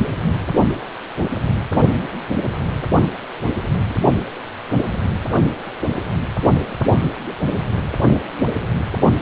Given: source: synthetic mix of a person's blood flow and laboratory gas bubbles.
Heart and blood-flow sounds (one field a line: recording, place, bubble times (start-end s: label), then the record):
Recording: Doppler ultrasound of blood flow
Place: precordium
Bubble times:
3.89-3.94 s: bubbles
From the record:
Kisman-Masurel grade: 121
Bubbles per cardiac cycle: 1 to 2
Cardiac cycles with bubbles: 10 to 50%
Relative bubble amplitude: barely perceptible (0.100 to 0.250)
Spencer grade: 2 (many but less than half of the cardiac periods contain bubble signals, singularly or in groups)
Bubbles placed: only in the low amplitude regions of the cardiac cycle